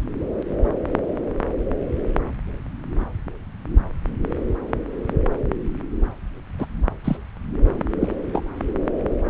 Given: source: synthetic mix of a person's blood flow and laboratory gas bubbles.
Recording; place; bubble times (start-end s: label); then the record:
Doppler ultrasound of blood flow; subclavian vein
6.58-6.66 s: bubbles
7.04-7.17 s: bubbles
8.01-8.12 s: bubbles
8.33-8.43 s: bubbles
From the record:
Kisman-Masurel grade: 122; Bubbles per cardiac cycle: 1 to 2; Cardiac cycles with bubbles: 10 to 50%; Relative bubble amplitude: moderate (0.250 to 0.450); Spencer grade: 2 (many but less than half of the cardiac periods contain bubble signals, singularly or in groups); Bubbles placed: anywhere in the cardiac cycle